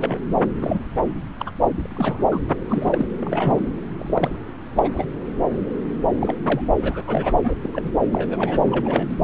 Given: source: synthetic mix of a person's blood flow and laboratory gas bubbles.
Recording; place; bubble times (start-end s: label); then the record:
Doppler ultrasound of blood flow; subclavian vein
0.00-0.20 s: bubbles
0.61-0.79 s: bubbles
1.39-1.51 s: bubbles
1.79-2.23 s: bubbles
2.31-2.40 s: bubbles
2.49-2.54 s: bubbles
2.69-3.07 s: bubbles
3.21-3.60 s: bubbles
3.98-4.38 s: bubbles
4.75-4.90 s: bubbles
4.93-5.06 s: bubbles
6.21-6.34 s: bubbles
6.46-6.67 s: bubbles
6.81-7.03 s: bubbles
7.07-7.38 s: bubbles
7.44-7.54 s: bubbles
7.62-7.69 s: bubbles
7.72-7.89 s: bubbles
8.11-8.62 s: bubbles
8.65-9.07 s: bubbles
9.10-9.17 s: bubbles
From the record:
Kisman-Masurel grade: 232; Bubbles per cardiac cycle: several, 3 to 8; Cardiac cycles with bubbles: 50 to 99%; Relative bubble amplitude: moderate (0.250 to 0.450); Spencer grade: 3 (all of the cardiac periods contain showers or single bubble signals, but not dominating or overriding the cardiac motion signals); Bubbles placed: anywhere in the cardiac cycle